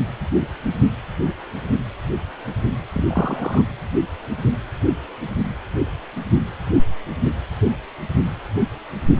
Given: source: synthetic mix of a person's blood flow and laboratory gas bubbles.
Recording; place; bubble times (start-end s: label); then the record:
Doppler ultrasound of blood flow; precordium
2.92-3.62 s: bubbles
From the record:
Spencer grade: 1 (occasional bubble signal discernible with the cardiac motion signal, with majority of cardiac periods free of bubbles); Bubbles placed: anywhere in the cardiac cycle